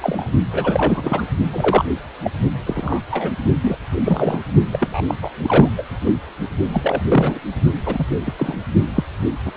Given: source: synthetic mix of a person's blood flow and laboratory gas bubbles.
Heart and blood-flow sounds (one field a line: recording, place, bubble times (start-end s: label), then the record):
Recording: Doppler ultrasound of blood flow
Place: precordium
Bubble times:
0.01-0.28 s: bubbles
0.51-1.24 s: bubbles
1.52-1.85 s: bubbles
2.22-2.31 s: bubbles
2.66-3.01 s: bubbles
3.10-3.32 s: bubbles
3.60-3.78 s: bubbles
4.04-4.43 s: bubbles
4.72-5.02 s: bubbles
5.07-5.15 s: bubbles
5.21-5.29 s: bubbles
5.42-5.69 s: bubbles
5.77-5.83 s: bubbles
6.05-6.12 s: bubbles
6.68-7.40 s: bubbles
7.86-8.05 s: bubbles
8.25-8.33 s: bubbles
8.36-8.58 s: bubbles
8.95-9.04 s: bubbles
9.46-9.52 s: bubbles
9.55-9.57 s: bubbles
From the record:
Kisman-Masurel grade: 242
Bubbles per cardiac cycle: several, 3 to 8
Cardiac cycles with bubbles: 100%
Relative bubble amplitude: moderate (0.250 to 0.450)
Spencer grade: 3 (all of the cardiac periods contain showers or single bubble signals, but not dominating or overriding the cardiac motion signals)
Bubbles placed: only in the low amplitude regions of the cardiac cycle